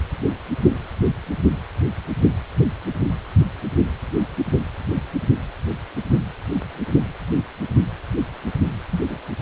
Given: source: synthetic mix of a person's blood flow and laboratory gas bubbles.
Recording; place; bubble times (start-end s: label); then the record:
Doppler ultrasound of blood flow; precordium
8.91-9.01 s: bubbles
9.09-9.18 s: bubbles
From the record:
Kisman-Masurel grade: 111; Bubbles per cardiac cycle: 1 to 2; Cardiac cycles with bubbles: 1 to 10%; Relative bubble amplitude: barely perceptible (0.100 to 0.250); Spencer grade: 1 (occasional bubble signal discernible with the cardiac motion signal, with majority of cardiac periods free of bubbles); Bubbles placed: only in the low amplitude regions of the cardiac cycle